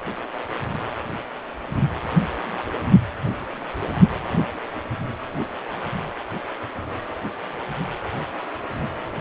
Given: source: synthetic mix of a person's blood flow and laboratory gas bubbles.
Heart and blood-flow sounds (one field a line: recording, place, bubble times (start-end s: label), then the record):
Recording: Doppler ultrasound of blood flow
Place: precordium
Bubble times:
no bubbles
From the record:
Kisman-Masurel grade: 000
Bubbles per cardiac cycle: 0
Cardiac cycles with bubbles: 0%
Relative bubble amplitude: no bubbles discernible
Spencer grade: 0 (complete lack of bubble signals)